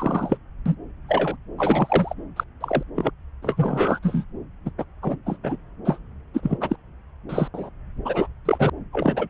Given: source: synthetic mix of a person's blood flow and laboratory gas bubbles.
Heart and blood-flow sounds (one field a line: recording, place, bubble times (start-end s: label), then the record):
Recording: Doppler ultrasound of blood flow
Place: subclavian vein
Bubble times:
0.00-0.38 s: bubbles
0.66-0.75 s: bubbles
1.08-1.36 s: bubbles
1.58-2.14 s: bubbles
2.36-2.44 s: bubbles
2.61-2.83 s: bubbles
2.96-3.11 s: bubbles
3.42-3.99 s: bubbles
4.02-4.24 s: bubbles
4.65-4.70 s: bubbles
4.78-4.84 s: bubbles
5.02-5.16 s: bubbles
5.26-5.37 s: bubbles
5.43-5.56 s: bubbles
5.85-5.98 s: bubbles
6.34-6.40 s: bubbles
6.43-6.58 s: bubbles
6.60-6.76 s: bubbles
7.29-7.48 s: bubbles
7.54-7.69 s: bubbles
8.05-8.27 s: bubbles
8.45-8.70 s: bubbles
8.92-9.28 s: bubbles
From the record:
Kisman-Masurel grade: 242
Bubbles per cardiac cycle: several, 3 to 8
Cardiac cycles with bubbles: 100%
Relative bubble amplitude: moderate (0.250 to 0.450)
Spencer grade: 3 (all of the cardiac periods contain showers or single bubble signals, but not dominating or overriding the cardiac motion signals)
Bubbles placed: anywhere in the cardiac cycle